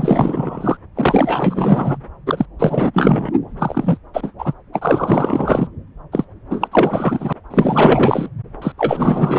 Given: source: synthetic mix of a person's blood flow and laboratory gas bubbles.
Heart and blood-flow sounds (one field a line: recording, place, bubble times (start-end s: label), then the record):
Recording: Doppler ultrasound of blood flow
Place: subclavian vein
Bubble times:
0.00-0.77 s: bubbles
0.96-1.97 s: bubbles
2.26-2.46 s: bubbles
2.59-3.32 s: bubbles
3.58-3.97 s: bubbles
4.13-4.33 s: bubbles
4.38-4.53 s: bubbles
4.72-5.67 s: bubbles
6.12-6.25 s: bubbles
6.50-6.68 s: bubbles
6.71-7.33 s: bubbles
7.50-8.29 s: bubbles
8.62-8.72 s: bubbles
8.78-9.39 s: bubbles
From the record:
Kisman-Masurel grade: 444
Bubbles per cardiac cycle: continuous sound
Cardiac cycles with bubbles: 100%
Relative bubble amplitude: maximal (0.775 to 0.999)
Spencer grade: 4 (maximum detectable bubble signal sounding continuously throughout systole and diastole of every cardiac period, and overriding the amplitude of the normal cardiac signals)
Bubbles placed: anywhere in the cardiac cycle